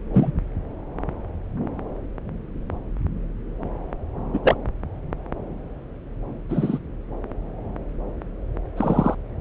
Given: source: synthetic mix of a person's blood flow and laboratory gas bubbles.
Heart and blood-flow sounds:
Doppler ultrasound of blood flow; subclavian vein
0.14-0.32 s: bubbles
4.33-4.39 s: bubbles
4.43-4.56 s: bubbles
6.49-6.78 s: bubbles
8.77-9.15 s: bubbles
From the record:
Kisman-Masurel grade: 123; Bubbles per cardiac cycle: 1 to 2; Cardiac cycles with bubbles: 10 to 50%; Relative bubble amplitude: loud (0.450 to 0.775); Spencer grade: 2 (many but less than half of the cardiac periods contain bubble signals, singularly or in groups); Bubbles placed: anywhere in the cardiac cycle

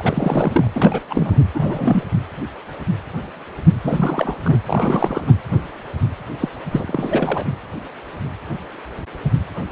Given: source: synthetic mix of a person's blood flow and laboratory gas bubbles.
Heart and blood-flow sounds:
Doppler ultrasound of blood flow; precordium
0.00-0.70 s: bubbles
0.75-1.00 s: bubbles
1.09-1.41 s: bubbles
1.54-2.05 s: bubbles
3.84-4.36 s: bubbles
4.43-4.58 s: bubbles
4.67-5.33 s: bubbles
6.40-6.49 s: bubbles
6.71-7.45 s: bubbles
From the record:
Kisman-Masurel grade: 332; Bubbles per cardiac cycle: rolling drumbeat, 9 or more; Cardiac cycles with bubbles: 50 to 99%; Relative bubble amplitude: moderate (0.250 to 0.450); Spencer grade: 3 (all of the cardiac periods contain showers or single bubble signals, but not dominating or overriding the cardiac motion signals); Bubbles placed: anywhere in the cardiac cycle

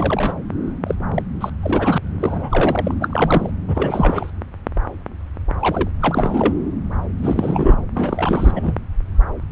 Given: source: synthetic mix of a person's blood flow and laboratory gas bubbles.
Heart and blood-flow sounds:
Doppler ultrasound of blood flow; subclavian vein
0.00-0.34 s: bubbles
0.86-0.95 s: bubbles
1.15-1.23 s: bubbles
1.40-1.50 s: bubbles
1.60-1.98 s: bubbles
2.03-2.95 s: bubbles
3.00-3.50 s: bubbles
3.68-4.30 s: bubbles
5.60-5.90 s: bubbles
6.00-6.54 s: bubbles
7.21-7.80 s: bubbles
7.94-8.75 s: bubbles
From the record:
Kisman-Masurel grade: 332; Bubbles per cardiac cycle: rolling drumbeat, 9 or more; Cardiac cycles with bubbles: 50 to 99%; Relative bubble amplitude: moderate (0.250 to 0.450); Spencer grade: 3 (all of the cardiac periods contain showers or single bubble signals, but not dominating or overriding the cardiac motion signals); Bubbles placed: anywhere in the cardiac cycle

